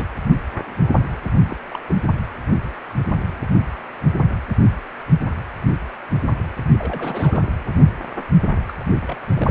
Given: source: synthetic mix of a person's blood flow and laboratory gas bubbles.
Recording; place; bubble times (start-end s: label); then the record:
Doppler ultrasound of blood flow; precordium
0.00-0.06 s: bubbles
1.49-1.56 s: bubbles
1.69-1.79 s: bubbles
1.88-1.97 s: bubbles
6.79-7.52 s: bubbles
8.68-8.73 s: bubbles
8.79-8.84 s: bubbles
9.07-9.16 s: bubbles
9.28-9.51 s: bubbles
From the record:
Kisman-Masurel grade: 221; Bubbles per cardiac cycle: several, 3 to 8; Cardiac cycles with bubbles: 10 to 50%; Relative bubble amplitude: barely perceptible (0.100 to 0.250); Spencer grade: 2 (many but less than half of the cardiac periods contain bubble signals, singularly or in groups); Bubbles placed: anywhere in the cardiac cycle